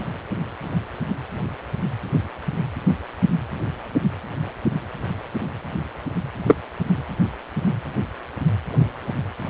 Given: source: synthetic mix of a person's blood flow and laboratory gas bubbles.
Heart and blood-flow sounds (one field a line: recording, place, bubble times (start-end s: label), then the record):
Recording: Doppler ultrasound of blood flow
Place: precordium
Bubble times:
6.48-6.54 s: bubbles
From the record:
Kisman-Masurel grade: 113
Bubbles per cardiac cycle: 1 to 2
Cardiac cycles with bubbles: 1 to 10%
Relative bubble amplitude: loud (0.450 to 0.775)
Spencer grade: 1 (occasional bubble signal discernible with the cardiac motion signal, with majority of cardiac periods free of bubbles)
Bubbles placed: anywhere in the cardiac cycle